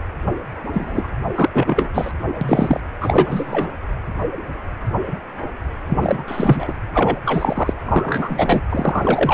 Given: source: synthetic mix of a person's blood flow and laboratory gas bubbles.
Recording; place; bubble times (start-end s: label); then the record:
Doppler ultrasound of blood flow; precordium
0.72-1.09 s: bubbles
1.35-1.50 s: bubbles
1.52-1.89 s: bubbles
1.94-2.12 s: bubbles
2.41-2.80 s: bubbles
3.00-3.67 s: bubbles
5.87-6.24 s: bubbles
6.26-6.72 s: bubbles
6.94-7.16 s: bubbles
7.25-7.74 s: bubbles
7.86-8.61 s: bubbles
8.70-9.33 s: bubbles
From the record:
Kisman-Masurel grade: 333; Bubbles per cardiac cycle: rolling drumbeat, 9 or more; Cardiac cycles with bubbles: 50 to 99%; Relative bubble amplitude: loud (0.450 to 0.775); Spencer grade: 3 (all of the cardiac periods contain showers or single bubble signals, but not dominating or overriding the cardiac motion signals); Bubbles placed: anywhere in the cardiac cycle